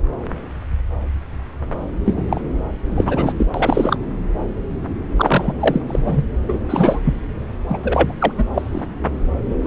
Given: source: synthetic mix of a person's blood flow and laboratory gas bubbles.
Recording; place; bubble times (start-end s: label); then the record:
Doppler ultrasound of blood flow; subclavian vein
2.06-2.24 s: bubbles
2.30-2.41 s: bubbles
2.95-3.04 s: bubbles
3.07-3.34 s: bubbles
3.37-3.46 s: bubbles
3.54-3.97 s: bubbles
5.16-5.53 s: bubbles
5.59-5.82 s: bubbles
5.88-6.25 s: bubbles
6.48-6.58 s: bubbles
6.69-7.00 s: bubbles
7.04-7.14 s: bubbles
7.69-7.79 s: bubbles
7.83-8.12 s: bubbles
8.20-8.32 s: bubbles
8.38-8.44 s: bubbles
8.54-8.85 s: bubbles
9.63-9.67 s: bubbles
From the record:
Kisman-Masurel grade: 333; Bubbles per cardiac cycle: rolling drumbeat, 9 or more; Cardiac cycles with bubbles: 50 to 99%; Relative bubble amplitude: loud (0.450 to 0.775); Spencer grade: 3 (all of the cardiac periods contain showers or single bubble signals, but not dominating or overriding the cardiac motion signals); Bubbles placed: anywhere in the cardiac cycle